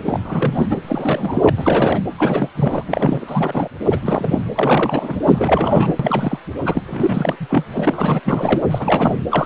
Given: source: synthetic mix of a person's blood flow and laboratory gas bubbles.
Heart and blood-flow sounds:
Doppler ultrasound of blood flow; precordium
0.05-0.19 s: bubbles
0.24-0.66 s: bubbles
0.70-0.80 s: bubbles
0.83-1.50 s: bubbles
1.56-2.00 s: bubbles
2.18-2.49 s: bubbles
2.56-2.84 s: bubbles
2.88-3.68 s: bubbles
3.90-3.99 s: bubbles
4.02-4.44 s: bubbles
4.55-5.17 s: bubbles
5.25-5.93 s: bubbles
5.99-6.39 s: bubbles
6.62-6.82 s: bubbles
6.86-7.37 s: bubbles
7.40-7.65 s: bubbles
7.74-8.20 s: bubbles
8.24-8.61 s: bubbles
8.71-9.16 s: bubbles
9.30-9.46 s: bubbles
From the record:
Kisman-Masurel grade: 342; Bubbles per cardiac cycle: rolling drumbeat, 9 or more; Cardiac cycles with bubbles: 100%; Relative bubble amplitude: moderate (0.250 to 0.450); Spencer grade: 3 (all of the cardiac periods contain showers or single bubble signals, but not dominating or overriding the cardiac motion signals); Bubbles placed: anywhere in the cardiac cycle

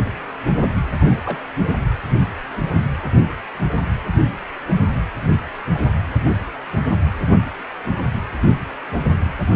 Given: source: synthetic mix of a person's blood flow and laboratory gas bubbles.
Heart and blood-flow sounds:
Doppler ultrasound of blood flow; precordium
1.00-1.20 s: bubbles
1.25-1.39 s: bubbles
5.72-5.80 s: bubbles
From the record:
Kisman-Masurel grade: 122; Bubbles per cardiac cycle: 1 to 2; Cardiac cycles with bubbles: 10 to 50%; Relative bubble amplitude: moderate (0.250 to 0.450); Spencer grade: 2 (many but less than half of the cardiac periods contain bubble signals, singularly or in groups); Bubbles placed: anywhere in the cardiac cycle

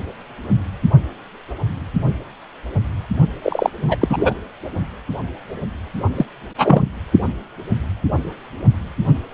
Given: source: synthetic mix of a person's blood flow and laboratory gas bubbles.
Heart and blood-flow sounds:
Doppler ultrasound of blood flow; precordium
3.42-3.70 s: bubbles
3.87-3.98 s: bubbles
4.00-4.33 s: bubbles
6.17-6.25 s: bubbles
6.58-6.82 s: bubbles
From the record:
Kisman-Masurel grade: 223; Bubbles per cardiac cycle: several, 3 to 8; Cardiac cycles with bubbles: 10 to 50%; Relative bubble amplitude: loud (0.450 to 0.775); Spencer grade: 2 (many but less than half of the cardiac periods contain bubble signals, singularly or in groups); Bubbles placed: only in the low amplitude regions of the cardiac cycle

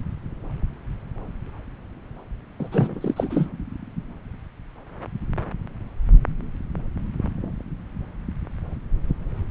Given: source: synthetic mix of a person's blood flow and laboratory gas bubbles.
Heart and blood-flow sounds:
Doppler ultrasound of blood flow; subclavian vein
2.59-2.69 s: bubbles
2.71-3.46 s: bubbles
From the record:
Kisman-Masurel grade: 212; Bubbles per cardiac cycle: several, 3 to 8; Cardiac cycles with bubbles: 1 to 10%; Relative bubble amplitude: moderate (0.250 to 0.450); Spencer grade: 1 (occasional bubble signal discernible with the cardiac motion signal, with majority of cardiac periods free of bubbles); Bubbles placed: anywhere in the cardiac cycle

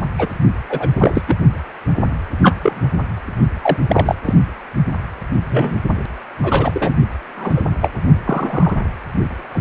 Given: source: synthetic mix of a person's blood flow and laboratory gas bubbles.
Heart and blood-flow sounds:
Doppler ultrasound of blood flow; precordium
0.18-0.29 s: bubbles
0.69-0.88 s: bubbles
0.94-1.23 s: bubbles
1.27-1.36 s: bubbles
2.42-2.56 s: bubbles
2.61-2.88 s: bubbles
3.61-3.77 s: bubbles
3.89-4.15 s: bubbles
4.25-4.34 s: bubbles
5.49-5.79 s: bubbles
6.42-6.94 s: bubbles
7.35-7.62 s: bubbles
7.81-7.90 s: bubbles
8.24-8.75 s: bubbles
9.52-9.61 s: bubbles
From the record:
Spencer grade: 3 (all of the cardiac periods contain showers or single bubble signals, but not dominating or overriding the cardiac motion signals); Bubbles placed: only in the low amplitude regions of the cardiac cycle

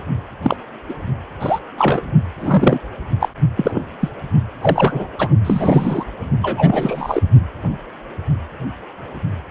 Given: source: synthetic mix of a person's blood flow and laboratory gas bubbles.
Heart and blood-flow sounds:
Doppler ultrasound of blood flow; precordium
0.42-0.56 s: bubbles
0.89-0.93 s: bubbles
1.40-1.59 s: bubbles
1.78-2.03 s: bubbles
2.39-2.79 s: bubbles
3.20-3.29 s: bubbles
3.56-3.80 s: bubbles
4.00-4.09 s: bubbles
4.61-5.09 s: bubbles
5.19-5.29 s: bubbles
5.45-6.05 s: bubbles
6.42-7.23 s: bubbles
From the record:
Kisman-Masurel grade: 233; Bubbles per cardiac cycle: several, 3 to 8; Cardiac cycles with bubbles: 50 to 99%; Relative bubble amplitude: loud (0.450 to 0.775); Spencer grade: 3 (all of the cardiac periods contain showers or single bubble signals, but not dominating or overriding the cardiac motion signals); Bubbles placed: only in the low amplitude regions of the cardiac cycle

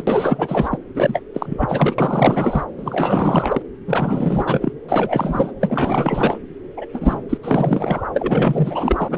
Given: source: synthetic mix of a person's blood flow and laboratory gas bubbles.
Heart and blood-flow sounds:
Doppler ultrasound of blood flow; subclavian vein
0.00-0.04 s: bubbles
0.07-0.79 s: bubbles
0.94-1.22 s: bubbles
1.33-2.66 s: bubbles
2.77-3.62 s: bubbles
3.87-4.73 s: bubbles
4.89-5.52 s: bubbles
5.61-6.38 s: bubbles
6.77-6.86 s: bubbles
6.93-7.23 s: bubbles
7.29-7.38 s: bubbles
7.43-8.05 s: bubbles
8.13-9.18 s: bubbles
From the record:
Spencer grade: 4 (maximum detectable bubble signal sounding continuously throughout systole and diastole of every cardiac period, and overriding the amplitude of the normal cardiac signals); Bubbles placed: anywhere in the cardiac cycle

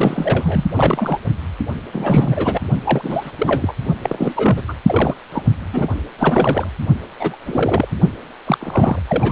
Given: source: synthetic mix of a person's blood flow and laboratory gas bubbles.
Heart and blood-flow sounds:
Doppler ultrasound of blood flow; precordium
0.00-0.65 s: bubbles
0.73-1.17 s: bubbles
1.92-2.61 s: bubbles
2.84-3.31 s: bubbles
3.38-3.73 s: bubbles
4.03-4.62 s: bubbles
4.67-4.74 s: bubbles
4.86-5.16 s: bubbles
5.32-5.42 s: bubbles
5.72-5.88 s: bubbles
6.18-6.67 s: bubbles
7.19-7.37 s: bubbles
7.47-7.88 s: bubbles
7.91-7.96 s: bubbles
8.46-8.99 s: bubbles
9.09-9.32 s: bubbles
From the record:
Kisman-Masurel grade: 342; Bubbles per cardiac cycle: rolling drumbeat, 9 or more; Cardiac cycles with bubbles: 100%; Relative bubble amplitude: moderate (0.250 to 0.450); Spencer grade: 3 (all of the cardiac periods contain showers or single bubble signals, but not dominating or overriding the cardiac motion signals); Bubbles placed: only in the low amplitude regions of the cardiac cycle

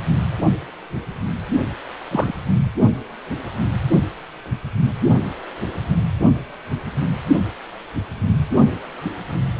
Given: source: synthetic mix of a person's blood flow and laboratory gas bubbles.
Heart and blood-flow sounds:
Doppler ultrasound of blood flow; precordium
2.10-2.33 s: bubbles
From the record:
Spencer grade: 1 (occasional bubble signal discernible with the cardiac motion signal, with majority of cardiac periods free of bubbles); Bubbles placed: only in the low amplitude regions of the cardiac cycle

